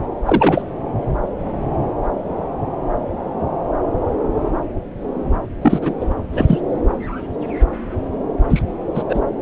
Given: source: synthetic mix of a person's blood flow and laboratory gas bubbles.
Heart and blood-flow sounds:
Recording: Doppler ultrasound of blood flow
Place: subclavian vein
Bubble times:
0.25-0.62 s: bubbles
5.61-5.93 s: bubbles
6.00-6.06 s: bubbles
6.33-6.58 s: bubbles
8.49-8.62 s: bubbles
8.95-9.03 s: bubbles
9.08-9.20 s: bubbles
From the record:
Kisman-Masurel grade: 223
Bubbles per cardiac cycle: several, 3 to 8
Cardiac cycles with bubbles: 10 to 50%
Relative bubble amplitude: loud (0.450 to 0.775)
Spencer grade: 2 (many but less than half of the cardiac periods contain bubble signals, singularly or in groups)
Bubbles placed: anywhere in the cardiac cycle

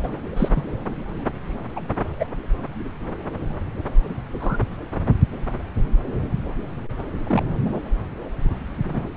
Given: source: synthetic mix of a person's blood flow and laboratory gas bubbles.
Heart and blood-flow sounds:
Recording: Doppler ultrasound of blood flow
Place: subclavian vein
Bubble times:
0.00-0.09 s: bubbles
0.36-0.49 s: bubbles
0.55-0.61 s: bubbles
1.76-1.81 s: bubbles
2.19-2.25 s: bubbles
4.40-4.58 s: bubbles
7.26-7.43 s: bubbles
8.82-9.09 s: bubbles
From the record:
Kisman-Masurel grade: 122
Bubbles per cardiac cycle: 1 to 2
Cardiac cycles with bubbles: 10 to 50%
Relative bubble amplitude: moderate (0.250 to 0.450)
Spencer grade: 2 (many but less than half of the cardiac periods contain bubble signals, singularly or in groups)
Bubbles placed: anywhere in the cardiac cycle

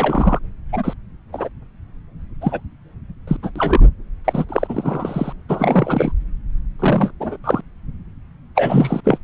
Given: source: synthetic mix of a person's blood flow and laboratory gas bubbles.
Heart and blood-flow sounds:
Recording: Doppler ultrasound of blood flow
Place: subclavian vein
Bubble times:
0.00-0.39 s: bubbles
0.72-0.94 s: bubbles
1.32-1.48 s: bubbles
2.41-2.60 s: bubbles
3.27-3.36 s: bubbles
3.42-3.50 s: bubbles
3.56-3.84 s: bubbles
4.24-4.45 s: bubbles
4.48-5.32 s: bubbles
5.48-6.12 s: bubbles
6.79-7.11 s: bubbles
7.20-7.37 s: bubbles
7.44-7.61 s: bubbles
8.55-9.01 s: bubbles
9.04-9.18 s: bubbles
From the record:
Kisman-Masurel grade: 243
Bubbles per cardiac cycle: several, 3 to 8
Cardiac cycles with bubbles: 100%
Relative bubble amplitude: loud (0.450 to 0.775)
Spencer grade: 3 (all of the cardiac periods contain showers or single bubble signals, but not dominating or overriding the cardiac motion signals)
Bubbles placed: anywhere in the cardiac cycle

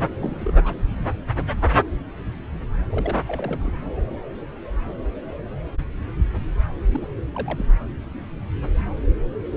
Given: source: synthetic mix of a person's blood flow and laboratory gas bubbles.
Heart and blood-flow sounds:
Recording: Doppler ultrasound of blood flow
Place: subclavian vein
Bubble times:
0.00-0.05 s: bubbles
0.19-0.53 s: bubbles
0.65-0.75 s: bubbles
2.91-3.17 s: bubbles
3.27-3.72 s: bubbles
6.92-7.08 s: bubbles
7.16-7.21 s: bubbles
7.33-7.66 s: bubbles
From the record:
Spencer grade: 2 (many but less than half of the cardiac periods contain bubble signals, singularly or in groups)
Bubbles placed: anywhere in the cardiac cycle

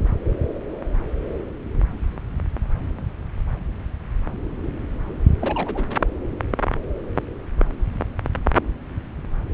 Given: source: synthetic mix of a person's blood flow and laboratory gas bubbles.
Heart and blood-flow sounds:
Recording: Doppler ultrasound of blood flow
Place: subclavian vein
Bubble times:
5.39-5.88 s: bubbles
From the record:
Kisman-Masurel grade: 211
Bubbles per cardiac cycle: several, 3 to 8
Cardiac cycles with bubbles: 1 to 10%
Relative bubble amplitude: barely perceptible (0.100 to 0.250)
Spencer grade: 1 (occasional bubble signal discernible with the cardiac motion signal, with majority of cardiac periods free of bubbles)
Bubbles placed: anywhere in the cardiac cycle

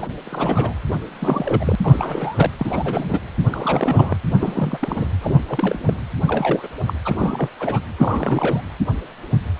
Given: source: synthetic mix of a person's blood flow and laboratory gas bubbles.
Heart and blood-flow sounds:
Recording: Doppler ultrasound of blood flow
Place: precordium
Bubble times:
0.00-0.10 s: bubbles
0.26-0.74 s: bubbles
1.19-1.75 s: bubbles
1.83-2.51 s: bubbles
2.59-3.19 s: bubbles
3.51-4.17 s: bubbles
4.31-5.08 s: bubbles
5.21-5.39 s: bubbles
5.49-5.97 s: bubbles
6.26-6.69 s: bubbles
6.87-6.94 s: bubbles
7.05-7.50 s: bubbles
7.60-7.80 s: bubbles
7.98-8.63 s: bubbles
From the record:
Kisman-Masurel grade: 332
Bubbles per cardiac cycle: rolling drumbeat, 9 or more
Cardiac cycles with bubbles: 50 to 99%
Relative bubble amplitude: moderate (0.250 to 0.450)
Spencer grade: 3 (all of the cardiac periods contain showers or single bubble signals, but not dominating or overriding the cardiac motion signals)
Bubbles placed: anywhere in the cardiac cycle

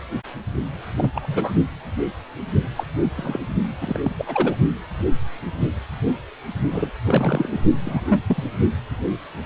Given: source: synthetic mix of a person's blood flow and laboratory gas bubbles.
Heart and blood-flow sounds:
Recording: Doppler ultrasound of blood flow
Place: precordium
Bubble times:
0.97-1.11 s: bubbles
1.14-1.52 s: bubbles
2.76-2.84 s: bubbles
3.17-3.39 s: bubbles
3.81-4.00 s: bubbles
4.04-4.15 s: bubbles
4.18-4.56 s: bubbles
6.70-6.90 s: bubbles
7.07-7.60 s: bubbles
7.85-8.21 s: bubbles
8.27-8.44 s: bubbles
From the record:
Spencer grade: 3 (all of the cardiac periods contain showers or single bubble signals, but not dominating or overriding the cardiac motion signals)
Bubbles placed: only in the low amplitude regions of the cardiac cycle

